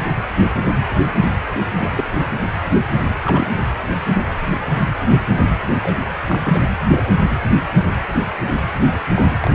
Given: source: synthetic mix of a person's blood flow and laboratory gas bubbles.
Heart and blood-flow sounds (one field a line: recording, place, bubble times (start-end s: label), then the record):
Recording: Doppler ultrasound of blood flow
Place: precordium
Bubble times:
1.76-1.92 s: bubbles
1.97-2.04 s: bubbles
3.25-3.59 s: bubbles
5.81-5.97 s: bubbles
6.28-6.64 s: bubbles
6.91-7.03 s: bubbles
9.16-9.22 s: bubbles
9.40-9.53 s: bubbles
From the record:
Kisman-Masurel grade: 122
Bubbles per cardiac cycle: 1 to 2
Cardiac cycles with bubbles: 10 to 50%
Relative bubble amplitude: moderate (0.250 to 0.450)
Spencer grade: 2 (many but less than half of the cardiac periods contain bubble signals, singularly or in groups)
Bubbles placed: anywhere in the cardiac cycle